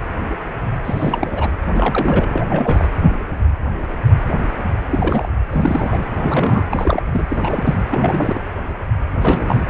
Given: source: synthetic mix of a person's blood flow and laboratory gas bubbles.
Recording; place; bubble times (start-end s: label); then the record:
Doppler ultrasound of blood flow; precordium
0.84-1.49 s: bubbles
1.74-2.44 s: bubbles
2.50-2.88 s: bubbles
4.87-5.29 s: bubbles
5.51-6.06 s: bubbles
6.20-6.64 s: bubbles
6.69-7.03 s: bubbles
7.12-7.80 s: bubbles
7.91-8.40 s: bubbles
9.21-9.68 s: bubbles
From the record:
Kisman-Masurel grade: 332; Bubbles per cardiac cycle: rolling drumbeat, 9 or more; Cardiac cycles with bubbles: 50 to 99%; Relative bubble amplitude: moderate (0.250 to 0.450); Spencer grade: 3 (all of the cardiac periods contain showers or single bubble signals, but not dominating or overriding the cardiac motion signals); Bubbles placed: anywhere in the cardiac cycle